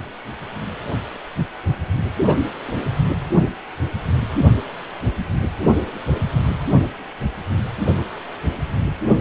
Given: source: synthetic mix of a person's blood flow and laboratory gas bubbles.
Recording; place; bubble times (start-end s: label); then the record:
Doppler ultrasound of blood flow; precordium
2.26-2.52 s: bubbles
2.67-2.79 s: bubbles
From the record:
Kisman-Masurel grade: 111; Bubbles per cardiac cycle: 1 to 2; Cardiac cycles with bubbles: 1 to 10%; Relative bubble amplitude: barely perceptible (0.100 to 0.250); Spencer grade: 1 (occasional bubble signal discernible with the cardiac motion signal, with majority of cardiac periods free of bubbles); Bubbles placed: anywhere in the cardiac cycle